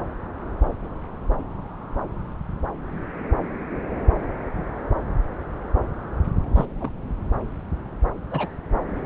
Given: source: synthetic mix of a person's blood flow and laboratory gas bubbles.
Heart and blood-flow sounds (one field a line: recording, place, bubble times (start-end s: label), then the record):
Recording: Doppler ultrasound of blood flow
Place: subclavian vein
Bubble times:
6.55-6.66 s: bubbles
6.80-6.90 s: bubbles
8.30-8.49 s: bubbles
From the record:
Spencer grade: 2 (many but less than half of the cardiac periods contain bubble signals, singularly or in groups)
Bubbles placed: anywhere in the cardiac cycle